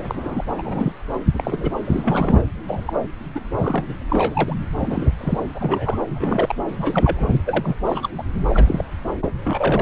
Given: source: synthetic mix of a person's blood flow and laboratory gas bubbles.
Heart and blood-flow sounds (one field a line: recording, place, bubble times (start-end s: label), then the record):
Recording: Doppler ultrasound of blood flow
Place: subclavian vein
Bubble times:
0.00-0.45 s: bubbles
0.57-0.92 s: bubbles
1.39-1.72 s: bubbles
1.84-2.42 s: bubbles
2.67-2.93 s: bubbles
3.35-3.40 s: bubbles
3.58-3.85 s: bubbles
3.88-3.96 s: bubbles
4.09-4.56 s: bubbles
4.80-5.12 s: bubbles
5.21-5.38 s: bubbles
5.54-5.97 s: bubbles
6.09-6.55 s: bubbles
6.68-7.33 s: bubbles
7.45-7.75 s: bubbles
7.85-8.09 s: bubbles
8.18-8.23 s: bubbles
8.50-8.85 s: bubbles
9.26-9.31 s: bubbles
9.44-9.82 s: bubbles
From the record:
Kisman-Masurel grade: 242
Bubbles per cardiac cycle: several, 3 to 8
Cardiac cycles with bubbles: 100%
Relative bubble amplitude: moderate (0.250 to 0.450)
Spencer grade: 3 (all of the cardiac periods contain showers or single bubble signals, but not dominating or overriding the cardiac motion signals)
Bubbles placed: anywhere in the cardiac cycle